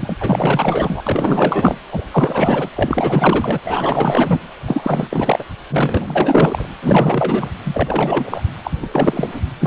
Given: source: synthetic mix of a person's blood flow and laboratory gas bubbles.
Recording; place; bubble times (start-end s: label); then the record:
Doppler ultrasound of blood flow; precordium
0.00-0.16 s: bubbles
0.20-1.03 s: bubbles
1.07-1.78 s: bubbles
1.92-2.05 s: bubbles
2.11-2.69 s: bubbles
2.75-3.59 s: bubbles
3.65-4.41 s: bubbles
4.66-5.45 s: bubbles
5.70-6.66 s: bubbles
6.82-7.49 s: bubbles
7.65-8.43 s: bubbles
8.64-8.71 s: bubbles
8.81-8.89 s: bubbles
8.93-9.41 s: bubbles
9.60-9.67 s: bubbles
From the record:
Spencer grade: 4 (maximum detectable bubble signal sounding continuously throughout systole and diastole of every cardiac period, and overriding the amplitude of the normal cardiac signals); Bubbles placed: anywhere in the cardiac cycle